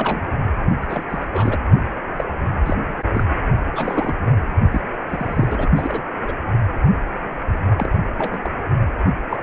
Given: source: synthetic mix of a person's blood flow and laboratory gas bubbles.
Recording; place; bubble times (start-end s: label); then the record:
Doppler ultrasound of blood flow; precordium
0.00-0.21 s: bubbles
0.81-1.03 s: bubbles
1.09-1.27 s: bubbles
1.33-1.58 s: bubbles
2.17-2.24 s: bubbles
2.65-2.78 s: bubbles
3.14-3.24 s: bubbles
3.71-4.15 s: bubbles
4.26-4.30 s: bubbles
4.71-4.81 s: bubbles
5.09-5.68 s: bubbles
5.76-6.01 s: bubbles
6.27-6.34 s: bubbles
7.77-8.05 s: bubbles
8.17-8.39 s: bubbles
8.44-8.50 s: bubbles
9.30-9.37 s: bubbles
From the record:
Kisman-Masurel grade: 232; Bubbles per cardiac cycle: several, 3 to 8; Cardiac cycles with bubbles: 50 to 99%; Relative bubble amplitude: moderate (0.250 to 0.450); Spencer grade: 3 (all of the cardiac periods contain showers or single bubble signals, but not dominating or overriding the cardiac motion signals); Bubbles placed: only in the low amplitude regions of the cardiac cycle